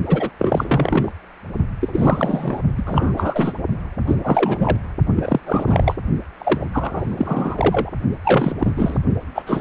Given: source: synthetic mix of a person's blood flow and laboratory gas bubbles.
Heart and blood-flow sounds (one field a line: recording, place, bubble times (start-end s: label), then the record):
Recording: Doppler ultrasound of blood flow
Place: precordium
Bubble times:
0.06-0.30 s: bubbles
0.39-1.12 s: bubbles
1.80-2.60 s: bubbles
2.77-2.82 s: bubbles
2.86-3.54 s: bubbles
4.07-4.16 s: bubbles
4.23-4.77 s: bubbles
5.16-5.40 s: bubbles
5.46-5.96 s: bubbles
6.39-6.68 s: bubbles
6.72-7.91 s: bubbles
8.24-8.54 s: bubbles
8.59-8.73 s: bubbles
8.76-8.98 s: bubbles
9.34-9.43 s: bubbles
9.46-9.61 s: bubbles
From the record:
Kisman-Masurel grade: 343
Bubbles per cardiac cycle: rolling drumbeat, 9 or more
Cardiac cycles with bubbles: 100%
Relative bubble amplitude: loud (0.450 to 0.775)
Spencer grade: 3 (all of the cardiac periods contain showers or single bubble signals, but not dominating or overriding the cardiac motion signals)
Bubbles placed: only in the low amplitude regions of the cardiac cycle